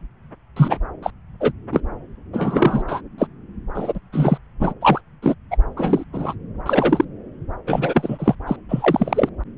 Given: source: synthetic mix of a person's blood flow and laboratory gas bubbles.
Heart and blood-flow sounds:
Doppler ultrasound of blood flow; subclavian vein
0.56-0.78 s: bubbles
1.02-1.10 s: bubbles
1.40-1.52 s: bubbles
1.72-1.80 s: bubbles
2.33-2.83 s: bubbles
2.88-3.01 s: bubbles
3.18-3.27 s: bubbles
3.74-4.00 s: bubbles
4.12-4.38 s: bubbles
4.60-4.73 s: bubbles
4.81-5.01 s: bubbles
5.22-5.34 s: bubbles
5.51-5.56 s: bubbles
5.76-6.04 s: bubbles
6.13-6.34 s: bubbles
6.65-7.04 s: bubbles
7.67-8.35 s: bubbles
8.46-8.57 s: bubbles
8.69-9.29 s: bubbles
From the record:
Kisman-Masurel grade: 243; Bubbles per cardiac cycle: several, 3 to 8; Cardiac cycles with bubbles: 100%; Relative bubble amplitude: loud (0.450 to 0.775); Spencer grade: 3 (all of the cardiac periods contain showers or single bubble signals, but not dominating or overriding the cardiac motion signals); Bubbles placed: anywhere in the cardiac cycle

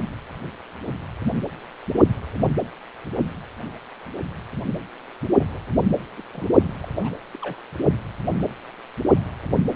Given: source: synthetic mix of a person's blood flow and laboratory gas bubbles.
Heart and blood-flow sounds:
Doppler ultrasound of blood flow; precordium
5.38-5.46 s: bubbles
5.53-5.59 s: bubbles
6.17-6.22 s: bubbles
6.33-6.46 s: bubbles
6.63-6.73 s: bubbles
6.82-6.88 s: bubbles
6.99-7.17 s: bubbles
7.33-7.38 s: bubbles
7.42-7.56 s: bubbles
From the record:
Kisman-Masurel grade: 221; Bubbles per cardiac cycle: several, 3 to 8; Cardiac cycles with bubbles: 10 to 50%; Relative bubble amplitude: barely perceptible (0.100 to 0.250); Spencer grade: 2 (many but less than half of the cardiac periods contain bubble signals, singularly or in groups); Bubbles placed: only in the low amplitude regions of the cardiac cycle

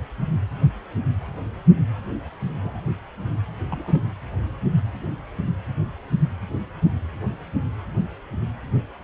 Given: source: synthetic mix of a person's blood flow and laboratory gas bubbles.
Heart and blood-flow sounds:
Doppler ultrasound of blood flow; precordium
2.62-2.81 s: bubbles
3.69-4.00 s: bubbles
From the record:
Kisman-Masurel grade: 121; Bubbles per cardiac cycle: 1 to 2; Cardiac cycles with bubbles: 10 to 50%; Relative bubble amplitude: barely perceptible (0.100 to 0.250); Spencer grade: 2 (many but less than half of the cardiac periods contain bubble signals, singularly or in groups); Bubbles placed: anywhere in the cardiac cycle

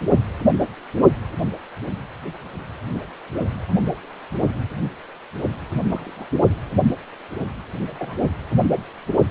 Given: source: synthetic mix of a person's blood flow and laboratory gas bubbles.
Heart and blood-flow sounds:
Doppler ultrasound of blood flow; precordium
5.89-6.26 s: bubbles
7.98-8.22 s: bubbles
From the record:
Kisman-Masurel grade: 121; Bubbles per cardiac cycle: 1 to 2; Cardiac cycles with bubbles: 10 to 50%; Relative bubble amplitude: barely perceptible (0.100 to 0.250); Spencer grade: 2 (many but less than half of the cardiac periods contain bubble signals, singularly or in groups); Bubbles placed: anywhere in the cardiac cycle

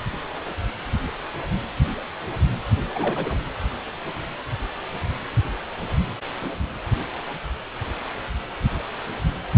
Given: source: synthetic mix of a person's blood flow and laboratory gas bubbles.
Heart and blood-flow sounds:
Doppler ultrasound of blood flow; precordium
2.90-3.35 s: bubbles
From the record:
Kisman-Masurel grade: 211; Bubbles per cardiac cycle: several, 3 to 8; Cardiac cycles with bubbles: 1 to 10%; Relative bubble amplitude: barely perceptible (0.100 to 0.250); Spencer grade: 1 (occasional bubble signal discernible with the cardiac motion signal, with majority of cardiac periods free of bubbles); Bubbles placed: anywhere in the cardiac cycle

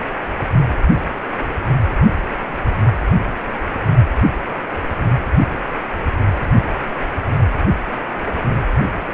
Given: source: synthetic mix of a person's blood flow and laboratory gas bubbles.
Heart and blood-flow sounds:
Doppler ultrasound of blood flow; precordium
no bubbles
From the record:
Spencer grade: 0 (complete lack of bubble signals)

